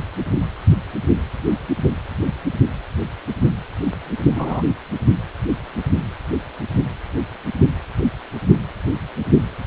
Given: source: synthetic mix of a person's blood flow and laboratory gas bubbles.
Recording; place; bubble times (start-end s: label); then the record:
Doppler ultrasound of blood flow; precordium
4.35-4.62 s: bubbles
From the record:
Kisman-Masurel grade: 113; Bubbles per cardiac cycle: 1 to 2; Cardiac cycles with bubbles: 1 to 10%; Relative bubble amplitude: loud (0.450 to 0.775); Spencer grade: 1 (occasional bubble signal discernible with the cardiac motion signal, with majority of cardiac periods free of bubbles); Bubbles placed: only in the low amplitude regions of the cardiac cycle